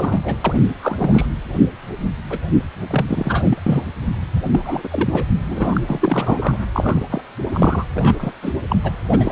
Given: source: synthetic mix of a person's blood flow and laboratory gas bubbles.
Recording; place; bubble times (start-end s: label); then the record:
Doppler ultrasound of blood flow; precordium
0.00-0.20 s: bubbles
0.24-0.37 s: bubbles
0.44-0.61 s: bubbles
0.80-1.26 s: bubbles
2.30-2.40 s: bubbles
2.90-3.63 s: bubbles
3.66-3.88 s: bubbles
4.50-5.27 s: bubbles
5.48-6.56 s: bubbles
6.73-7.03 s: bubbles
7.09-7.21 s: bubbles
7.52-7.85 s: bubbles
7.94-8.32 s: bubbles
8.42-8.53 s: bubbles
8.69-8.76 s: bubbles
8.83-8.92 s: bubbles
9.10-9.32 s: bubbles
From the record:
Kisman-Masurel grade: 242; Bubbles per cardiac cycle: several, 3 to 8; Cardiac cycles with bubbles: 100%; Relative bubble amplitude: moderate (0.250 to 0.450); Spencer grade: 3 (all of the cardiac periods contain showers or single bubble signals, but not dominating or overriding the cardiac motion signals); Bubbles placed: anywhere in the cardiac cycle